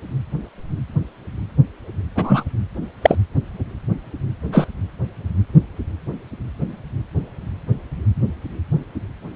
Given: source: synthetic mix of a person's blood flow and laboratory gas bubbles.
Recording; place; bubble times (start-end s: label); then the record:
Doppler ultrasound of blood flow; precordium
2.15-2.44 s: bubbles
3.02-3.15 s: bubbles
4.52-4.67 s: bubbles
From the record:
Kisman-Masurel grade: 123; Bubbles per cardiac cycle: 1 to 2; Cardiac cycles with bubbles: 10 to 50%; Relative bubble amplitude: loud (0.450 to 0.775); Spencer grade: 2 (many but less than half of the cardiac periods contain bubble signals, singularly or in groups); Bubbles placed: anywhere in the cardiac cycle